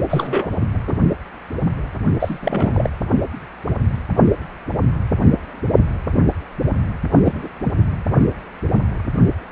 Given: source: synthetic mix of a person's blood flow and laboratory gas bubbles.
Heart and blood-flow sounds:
Doppler ultrasound of blood flow; precordium
0.10-0.51 s: bubbles
0.86-0.96 s: bubbles
2.20-2.90 s: bubbles
7.24-7.49 s: bubbles
7.64-7.73 s: bubbles
From the record:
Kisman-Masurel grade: 222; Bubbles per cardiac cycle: several, 3 to 8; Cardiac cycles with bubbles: 10 to 50%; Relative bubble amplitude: moderate (0.250 to 0.450); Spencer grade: 2 (many but less than half of the cardiac periods contain bubble signals, singularly or in groups); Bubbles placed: only in the low amplitude regions of the cardiac cycle

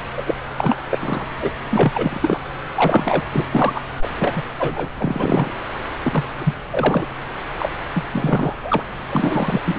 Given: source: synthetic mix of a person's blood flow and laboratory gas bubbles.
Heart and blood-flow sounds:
Doppler ultrasound of blood flow; subclavian vein
0.17-0.23 s: bubbles
0.27-0.35 s: bubbles
0.56-0.77 s: bubbles
0.90-1.25 s: bubbles
1.41-1.50 s: bubbles
1.72-2.40 s: bubbles
2.75-3.23 s: bubbles
3.31-3.47 s: bubbles
3.51-3.81 s: bubbles
4.00-4.10 s: bubbles
4.17-4.42 s: bubbles
4.58-4.89 s: bubbles
4.97-5.51 s: bubbles
6.03-6.24 s: bubbles
6.38-6.54 s: bubbles
6.70-7.05 s: bubbles
7.55-7.69 s: bubbles
7.94-8.03 s: bubbles
8.12-8.55 s: bubbles
8.62-8.84 s: bubbles
9.09-9.62 s: bubbles
9.65-9.79 s: bubbles
From the record:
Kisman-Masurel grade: 343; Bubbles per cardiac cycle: rolling drumbeat, 9 or more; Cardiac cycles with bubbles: 100%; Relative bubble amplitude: loud (0.450 to 0.775); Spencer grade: 3 (all of the cardiac periods contain showers or single bubble signals, but not dominating or overriding the cardiac motion signals); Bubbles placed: anywhere in the cardiac cycle

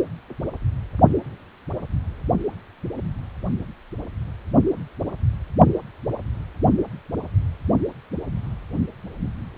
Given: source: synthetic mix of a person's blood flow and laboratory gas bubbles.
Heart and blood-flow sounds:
Doppler ultrasound of blood flow; precordium
no bubbles
From the record:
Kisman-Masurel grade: 000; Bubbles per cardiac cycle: 0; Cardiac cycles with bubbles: 0%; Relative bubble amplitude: no bubbles discernible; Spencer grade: 0 (complete lack of bubble signals)

